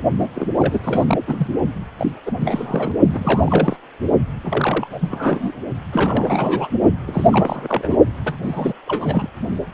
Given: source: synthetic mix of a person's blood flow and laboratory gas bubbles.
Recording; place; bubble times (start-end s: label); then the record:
Doppler ultrasound of blood flow; precordium
0.18-0.28 s: bubbles
0.34-0.47 s: bubbles
0.56-1.04 s: bubbles
1.07-1.18 s: bubbles
1.27-1.48 s: bubbles
1.98-2.12 s: bubbles
2.25-2.32 s: bubbles
2.41-2.92 s: bubbles
3.08-3.77 s: bubbles
4.44-4.87 s: bubbles
4.92-5.52 s: bubbles
5.92-6.69 s: bubbles
7.07-7.97 s: bubbles
8.24-8.36 s: bubbles
8.42-8.73 s: bubbles
8.87-9.29 s: bubbles
From the record:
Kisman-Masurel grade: 332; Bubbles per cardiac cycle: rolling drumbeat, 9 or more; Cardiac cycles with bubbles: 50 to 99%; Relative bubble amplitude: moderate (0.250 to 0.450); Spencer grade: 3 (all of the cardiac periods contain showers or single bubble signals, but not dominating or overriding the cardiac motion signals); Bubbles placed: only in the low amplitude regions of the cardiac cycle